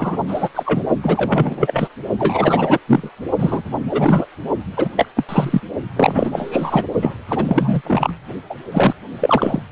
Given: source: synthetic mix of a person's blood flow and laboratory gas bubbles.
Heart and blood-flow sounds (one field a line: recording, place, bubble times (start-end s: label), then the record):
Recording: Doppler ultrasound of blood flow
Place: precordium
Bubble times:
0.00-0.17 s: bubbles
0.28-0.49 s: bubbles
0.55-0.82 s: bubbles
1.03-1.88 s: bubbles
2.19-2.79 s: bubbles
2.88-3.10 s: bubbles
3.39-3.62 s: bubbles
3.90-4.26 s: bubbles
4.77-4.90 s: bubbles
4.96-5.08 s: bubbles
5.16-5.24 s: bubbles
5.29-5.61 s: bubbles
5.96-6.86 s: bubbles
7.01-7.15 s: bubbles
7.29-8.12 s: bubbles
8.50-8.55 s: bubbles
8.71-8.93 s: bubbles
9.20-9.62 s: bubbles
From the record:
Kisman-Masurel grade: 343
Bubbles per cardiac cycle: rolling drumbeat, 9 or more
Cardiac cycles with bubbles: 100%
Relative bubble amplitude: loud (0.450 to 0.775)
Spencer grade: 3 (all of the cardiac periods contain showers or single bubble signals, but not dominating or overriding the cardiac motion signals)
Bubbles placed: only in the low amplitude regions of the cardiac cycle